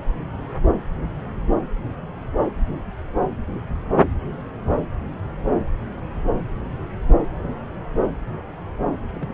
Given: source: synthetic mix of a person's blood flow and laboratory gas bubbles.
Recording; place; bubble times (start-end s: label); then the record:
Doppler ultrasound of blood flow; subclavian vein
9.13-9.34 s: bubbles
From the record:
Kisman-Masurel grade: 121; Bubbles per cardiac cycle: 1 to 2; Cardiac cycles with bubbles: 10 to 50%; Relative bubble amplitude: barely perceptible (0.100 to 0.250); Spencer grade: 2 (many but less than half of the cardiac periods contain bubble signals, singularly or in groups); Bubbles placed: anywhere in the cardiac cycle